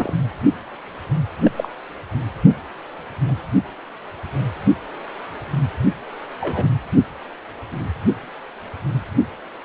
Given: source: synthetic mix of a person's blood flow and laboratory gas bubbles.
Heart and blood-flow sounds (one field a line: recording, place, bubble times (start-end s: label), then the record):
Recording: Doppler ultrasound of blood flow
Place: precordium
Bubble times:
0.00-0.13 s: bubbles
1.44-1.51 s: bubbles
1.56-1.68 s: bubbles
3.28-3.35 s: bubbles
6.40-6.71 s: bubbles
From the record:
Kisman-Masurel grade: 122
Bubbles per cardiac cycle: 1 to 2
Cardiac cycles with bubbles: 10 to 50%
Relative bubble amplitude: moderate (0.250 to 0.450)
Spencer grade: 2 (many but less than half of the cardiac periods contain bubble signals, singularly or in groups)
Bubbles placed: only in the low amplitude regions of the cardiac cycle